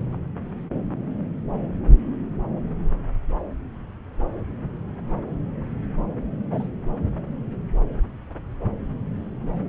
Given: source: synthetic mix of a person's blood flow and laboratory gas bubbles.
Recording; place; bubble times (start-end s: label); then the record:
Doppler ultrasound of blood flow; subclavian vein
6.50-6.67 s: bubbles
From the record:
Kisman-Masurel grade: 111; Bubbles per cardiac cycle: 1 to 2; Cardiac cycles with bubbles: 1 to 10%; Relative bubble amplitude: barely perceptible (0.100 to 0.250); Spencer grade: 1 (occasional bubble signal discernible with the cardiac motion signal, with majority of cardiac periods free of bubbles); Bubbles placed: anywhere in the cardiac cycle